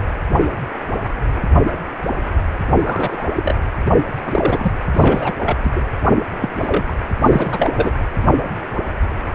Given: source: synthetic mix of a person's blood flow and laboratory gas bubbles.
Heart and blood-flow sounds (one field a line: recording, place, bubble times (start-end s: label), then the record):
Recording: Doppler ultrasound of blood flow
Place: precordium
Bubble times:
2.78-3.27 s: bubbles
3.36-3.54 s: bubbles
4.25-4.71 s: bubbles
4.93-5.33 s: bubbles
5.45-5.56 s: bubbles
5.63-5.72 s: bubbles
5.75-5.81 s: bubbles
6.41-6.49 s: bubbles
6.54-6.96 s: bubbles
7.21-7.91 s: bubbles
From the record:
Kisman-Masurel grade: 232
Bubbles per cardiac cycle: several, 3 to 8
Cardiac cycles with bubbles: 50 to 99%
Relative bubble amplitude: moderate (0.250 to 0.450)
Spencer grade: 3 (all of the cardiac periods contain showers or single bubble signals, but not dominating or overriding the cardiac motion signals)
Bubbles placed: anywhere in the cardiac cycle